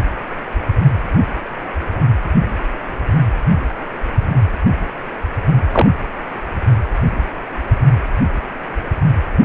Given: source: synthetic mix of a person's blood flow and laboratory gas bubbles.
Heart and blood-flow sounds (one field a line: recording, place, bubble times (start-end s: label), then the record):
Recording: Doppler ultrasound of blood flow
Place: precordium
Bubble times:
5.71-5.87 s: bubbles
From the record:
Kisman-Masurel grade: 123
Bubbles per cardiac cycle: 1 to 2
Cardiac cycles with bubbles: 10 to 50%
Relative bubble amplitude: loud (0.450 to 0.775)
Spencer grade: 2 (many but less than half of the cardiac periods contain bubble signals, singularly or in groups)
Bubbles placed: anywhere in the cardiac cycle